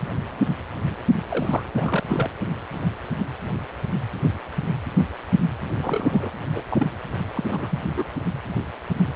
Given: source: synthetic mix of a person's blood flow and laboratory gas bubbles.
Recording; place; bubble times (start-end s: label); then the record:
Doppler ultrasound of blood flow; precordium
1.30-1.62 s: bubbles
1.76-2.29 s: bubbles
5.79-6.30 s: bubbles
6.54-6.62 s: bubbles
6.70-6.88 s: bubbles
7.35-7.79 s: bubbles
7.97-8.04 s: bubbles
From the record:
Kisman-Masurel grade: 221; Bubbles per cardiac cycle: several, 3 to 8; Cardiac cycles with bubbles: 10 to 50%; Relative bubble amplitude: barely perceptible (0.100 to 0.250); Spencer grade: 2 (many but less than half of the cardiac periods contain bubble signals, singularly or in groups); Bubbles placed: anywhere in the cardiac cycle